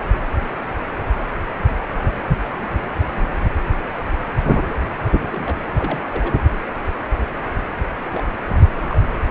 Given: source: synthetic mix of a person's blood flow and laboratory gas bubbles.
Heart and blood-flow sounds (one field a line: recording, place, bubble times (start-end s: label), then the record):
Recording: Doppler ultrasound of blood flow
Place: precordium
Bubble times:
5.30-5.58 s: bubbles
5.76-6.00 s: bubbles
6.12-6.35 s: bubbles
8.11-8.23 s: bubbles
8.46-8.54 s: bubbles
8.88-9.02 s: bubbles
From the record:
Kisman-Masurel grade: 121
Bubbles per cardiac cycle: 1 to 2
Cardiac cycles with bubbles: 10 to 50%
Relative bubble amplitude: barely perceptible (0.100 to 0.250)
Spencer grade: 2 (many but less than half of the cardiac periods contain bubble signals, singularly or in groups)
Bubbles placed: anywhere in the cardiac cycle